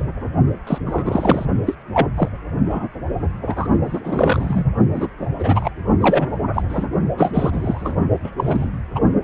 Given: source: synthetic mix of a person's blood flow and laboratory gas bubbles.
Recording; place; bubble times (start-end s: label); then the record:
Doppler ultrasound of blood flow; precordium
0.00-0.06 s: bubbles
0.67-0.79 s: bubbles
0.85-1.46 s: bubbles
1.66-1.74 s: bubbles
1.94-2.08 s: bubbles
2.15-2.29 s: bubbles
2.65-2.88 s: bubbles
3.46-3.69 s: bubbles
3.85-4.00 s: bubbles
4.04-4.65 s: bubbles
4.93-5.08 s: bubbles
5.38-5.70 s: bubbles
6.00-6.27 s: bubbles
6.54-6.62 s: bubbles
6.69-6.87 s: bubbles
7.17-7.97 s: bubbles
8.23-8.31 s: bubbles
8.37-8.70 s: bubbles
8.95-9.00 s: bubbles
From the record:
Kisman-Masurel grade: 243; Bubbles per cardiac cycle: several, 3 to 8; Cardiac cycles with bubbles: 100%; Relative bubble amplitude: loud (0.450 to 0.775); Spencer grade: 3 (all of the cardiac periods contain showers or single bubble signals, but not dominating or overriding the cardiac motion signals); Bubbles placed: only in the low amplitude regions of the cardiac cycle